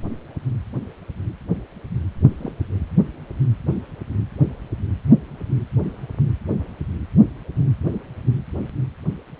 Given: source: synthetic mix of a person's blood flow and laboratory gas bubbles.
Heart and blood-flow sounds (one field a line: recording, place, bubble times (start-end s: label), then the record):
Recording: Doppler ultrasound of blood flow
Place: precordium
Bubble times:
2.38-2.52 s: bubbles
From the record:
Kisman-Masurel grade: 121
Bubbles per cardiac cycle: 1 to 2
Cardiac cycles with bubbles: 10 to 50%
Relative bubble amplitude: barely perceptible (0.100 to 0.250)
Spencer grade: 2 (many but less than half of the cardiac periods contain bubble signals, singularly or in groups)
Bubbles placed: anywhere in the cardiac cycle